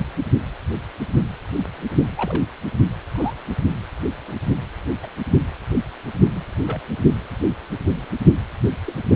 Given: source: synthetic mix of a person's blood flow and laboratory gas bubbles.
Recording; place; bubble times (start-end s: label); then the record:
Doppler ultrasound of blood flow; precordium
2.16-2.43 s: bubbles
3.15-3.34 s: bubbles
4.27-4.33 s: bubbles
5.02-5.06 s: bubbles
6.31-6.54 s: bubbles
6.67-6.79 s: bubbles
8.86-8.93 s: bubbles
From the record:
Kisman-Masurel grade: 121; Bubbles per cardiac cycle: 1 to 2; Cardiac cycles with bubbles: 10 to 50%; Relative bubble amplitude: barely perceptible (0.100 to 0.250); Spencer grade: 2 (many but less than half of the cardiac periods contain bubble signals, singularly or in groups); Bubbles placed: only in the low amplitude regions of the cardiac cycle